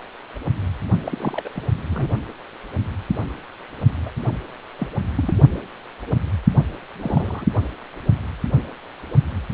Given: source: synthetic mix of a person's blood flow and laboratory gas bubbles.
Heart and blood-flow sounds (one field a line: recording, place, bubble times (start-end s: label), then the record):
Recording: Doppler ultrasound of blood flow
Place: precordium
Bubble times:
1.04-1.49 s: bubbles
1.55-1.67 s: bubbles
1.90-2.09 s: bubbles
4.05-4.10 s: bubbles
4.79-4.88 s: bubbles
5.17-5.33 s: bubbles
7.00-7.46 s: bubbles
From the record:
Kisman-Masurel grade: 221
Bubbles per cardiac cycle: several, 3 to 8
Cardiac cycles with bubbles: 10 to 50%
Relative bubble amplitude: barely perceptible (0.100 to 0.250)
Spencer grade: 2 (many but less than half of the cardiac periods contain bubble signals, singularly or in groups)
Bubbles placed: only in the low amplitude regions of the cardiac cycle